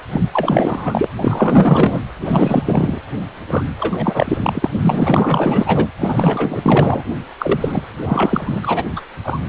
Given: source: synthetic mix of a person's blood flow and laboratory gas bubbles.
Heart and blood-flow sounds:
Doppler ultrasound of blood flow; precordium
0.11-0.21 s: bubbles
0.33-1.08 s: bubbles
1.18-2.00 s: bubbles
2.25-2.98 s: bubbles
3.48-3.67 s: bubbles
3.78-4.70 s: bubbles
4.78-5.87 s: bubbles
6.00-7.03 s: bubbles
7.38-7.83 s: bubbles
8.02-8.83 s: bubbles
8.96-9.02 s: bubbles
9.25-9.40 s: bubbles
From the record:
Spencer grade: 4 (maximum detectable bubble signal sounding continuously throughout systole and diastole of every cardiac period, and overriding the amplitude of the normal cardiac signals); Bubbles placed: anywhere in the cardiac cycle

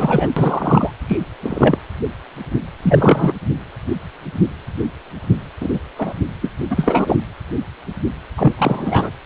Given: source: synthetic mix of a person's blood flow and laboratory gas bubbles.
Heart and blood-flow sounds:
Doppler ultrasound of blood flow; precordium
0.00-0.29 s: bubbles
0.36-0.91 s: bubbles
1.08-1.18 s: bubbles
1.42-1.78 s: bubbles
2.82-3.33 s: bubbles
5.60-5.70 s: bubbles
5.73-5.79 s: bubbles
5.98-6.13 s: bubbles
6.42-6.52 s: bubbles
6.70-7.19 s: bubbles
8.37-8.53 s: bubbles
8.58-9.11 s: bubbles
From the record:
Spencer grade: 2 (many but less than half of the cardiac periods contain bubble signals, singularly or in groups); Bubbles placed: anywhere in the cardiac cycle

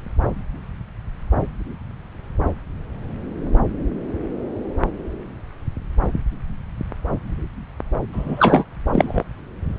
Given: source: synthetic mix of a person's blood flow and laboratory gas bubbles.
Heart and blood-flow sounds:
Doppler ultrasound of blood flow; subclavian vein
8.12-8.64 s: bubbles
8.92-9.23 s: bubbles
From the record:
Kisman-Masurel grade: 213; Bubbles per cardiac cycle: several, 3 to 8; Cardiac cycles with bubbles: 1 to 10%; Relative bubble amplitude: loud (0.450 to 0.775); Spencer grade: 1 (occasional bubble signal discernible with the cardiac motion signal, with majority of cardiac periods free of bubbles); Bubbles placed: anywhere in the cardiac cycle

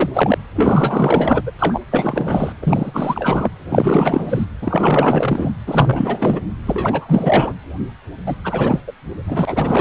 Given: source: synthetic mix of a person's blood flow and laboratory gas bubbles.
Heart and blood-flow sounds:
Doppler ultrasound of blood flow; precordium
0.00-0.38 s: bubbles
0.55-1.42 s: bubbles
1.46-1.51 s: bubbles
1.59-1.80 s: bubbles
1.91-2.53 s: bubbles
2.62-3.50 s: bubbles
3.69-4.45 s: bubbles
4.61-5.53 s: bubbles
5.67-6.40 s: bubbles
6.67-7.54 s: bubbles
8.26-8.36 s: bubbles
8.44-8.80 s: bubbles
8.87-8.93 s: bubbles
9.27-9.81 s: bubbles
From the record:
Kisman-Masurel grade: 444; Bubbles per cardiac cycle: continuous sound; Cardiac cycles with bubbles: 100%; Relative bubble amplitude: maximal (0.775 to 0.999); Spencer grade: 4 (maximum detectable bubble signal sounding continuously throughout systole and diastole of every cardiac period, and overriding the amplitude of the normal cardiac signals); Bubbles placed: anywhere in the cardiac cycle

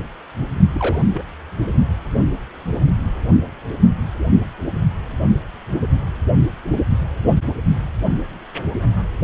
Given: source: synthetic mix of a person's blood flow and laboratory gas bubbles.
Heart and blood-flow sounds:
Doppler ultrasound of blood flow; precordium
0.73-1.01 s: bubbles
1.14-1.24 s: bubbles
From the record:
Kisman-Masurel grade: 111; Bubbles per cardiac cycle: 1 to 2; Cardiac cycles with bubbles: 1 to 10%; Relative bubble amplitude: barely perceptible (0.100 to 0.250); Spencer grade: 1 (occasional bubble signal discernible with the cardiac motion signal, with majority of cardiac periods free of bubbles); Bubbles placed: only in the low amplitude regions of the cardiac cycle

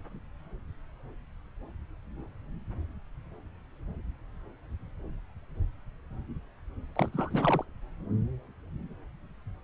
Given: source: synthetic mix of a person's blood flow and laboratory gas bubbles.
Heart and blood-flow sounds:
Doppler ultrasound of blood flow; subclavian vein
6.96-7.08 s: bubbles
7.12-7.64 s: bubbles
From the record:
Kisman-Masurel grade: 212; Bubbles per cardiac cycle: several, 3 to 8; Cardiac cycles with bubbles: 1 to 10%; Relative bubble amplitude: moderate (0.250 to 0.450); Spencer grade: 1 (occasional bubble signal discernible with the cardiac motion signal, with majority of cardiac periods free of bubbles); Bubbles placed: anywhere in the cardiac cycle

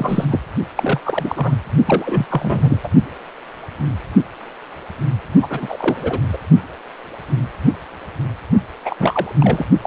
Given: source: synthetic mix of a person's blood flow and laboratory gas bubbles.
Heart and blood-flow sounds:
Doppler ultrasound of blood flow; precordium
0.00-0.25 s: bubbles
0.28-0.39 s: bubbles
0.76-1.00 s: bubbles
1.04-1.54 s: bubbles
1.86-2.26 s: bubbles
2.29-2.79 s: bubbles
2.83-2.88 s: bubbles
5.42-5.47 s: bubbles
5.50-6.20 s: bubbles
6.33-6.38 s: bubbles
8.85-8.96 s: bubbles
9.00-9.32 s: bubbles
9.40-9.66 s: bubbles
9.82-9.86 s: bubbles
From the record:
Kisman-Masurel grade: 332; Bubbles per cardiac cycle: rolling drumbeat, 9 or more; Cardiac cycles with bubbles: 50 to 99%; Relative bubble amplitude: moderate (0.250 to 0.450); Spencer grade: 3 (all of the cardiac periods contain showers or single bubble signals, but not dominating or overriding the cardiac motion signals); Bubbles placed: only in the low amplitude regions of the cardiac cycle

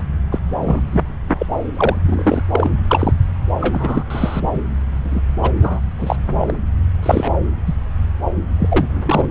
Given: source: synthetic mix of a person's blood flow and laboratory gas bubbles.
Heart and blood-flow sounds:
Doppler ultrasound of blood flow; subclavian vein
0.00-0.03 s: bubbles
0.31-0.39 s: bubbles
0.65-0.80 s: bubbles
0.91-1.01 s: bubbles
1.28-1.46 s: bubbles
1.76-1.97 s: bubbles
2.05-2.43 s: bubbles
2.54-2.71 s: bubbles
2.88-3.13 s: bubbles
3.60-4.05 s: bubbles
4.10-4.59 s: bubbles
5.04-5.21 s: bubbles
5.42-5.53 s: bubbles
5.61-5.79 s: bubbles
5.98-6.16 s: bubbles
6.39-6.54 s: bubbles
7.03-7.33 s: bubbles
7.66-7.75 s: bubbles
8.59-9.26 s: bubbles
From the record:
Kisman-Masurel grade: 233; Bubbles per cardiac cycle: several, 3 to 8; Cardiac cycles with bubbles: 50 to 99%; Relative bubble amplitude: loud (0.450 to 0.775); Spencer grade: 3 (all of the cardiac periods contain showers or single bubble signals, but not dominating or overriding the cardiac motion signals); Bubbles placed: anywhere in the cardiac cycle

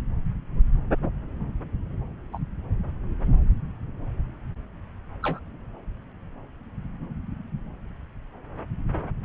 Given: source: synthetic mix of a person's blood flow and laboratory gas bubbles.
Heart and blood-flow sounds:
Doppler ultrasound of blood flow; subclavian vein
2.33-2.38 s: bubbles
5.22-5.39 s: bubbles
From the record:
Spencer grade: 2 (many but less than half of the cardiac periods contain bubble signals, singularly or in groups); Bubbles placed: anywhere in the cardiac cycle

